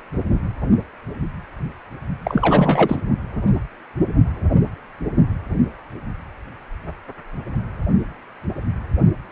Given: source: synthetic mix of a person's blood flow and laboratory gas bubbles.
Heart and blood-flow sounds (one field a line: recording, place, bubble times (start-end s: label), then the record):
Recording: Doppler ultrasound of blood flow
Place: precordium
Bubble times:
2.25-3.02 s: bubbles
From the record:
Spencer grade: 1 (occasional bubble signal discernible with the cardiac motion signal, with majority of cardiac periods free of bubbles)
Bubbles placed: only in the low amplitude regions of the cardiac cycle